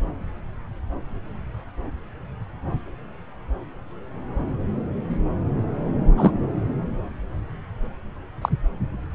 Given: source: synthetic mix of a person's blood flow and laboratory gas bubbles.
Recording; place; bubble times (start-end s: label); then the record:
Doppler ultrasound of blood flow; subclavian vein
6.17-6.31 s: bubbles
8.41-8.49 s: bubbles
From the record:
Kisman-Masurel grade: 123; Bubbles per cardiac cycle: 1 to 2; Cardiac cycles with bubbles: 10 to 50%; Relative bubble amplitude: loud (0.450 to 0.775); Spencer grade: 2 (many but less than half of the cardiac periods contain bubble signals, singularly or in groups); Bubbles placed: anywhere in the cardiac cycle